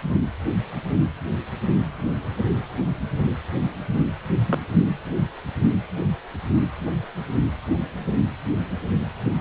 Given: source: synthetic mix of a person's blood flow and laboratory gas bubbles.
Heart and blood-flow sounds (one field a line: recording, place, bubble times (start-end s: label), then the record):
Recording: Doppler ultrasound of blood flow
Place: precordium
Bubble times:
4.46-4.62 s: bubbles
From the record:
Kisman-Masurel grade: 112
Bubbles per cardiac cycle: 1 to 2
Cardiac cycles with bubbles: 1 to 10%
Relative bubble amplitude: moderate (0.250 to 0.450)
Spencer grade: 1 (occasional bubble signal discernible with the cardiac motion signal, with majority of cardiac periods free of bubbles)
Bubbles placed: anywhere in the cardiac cycle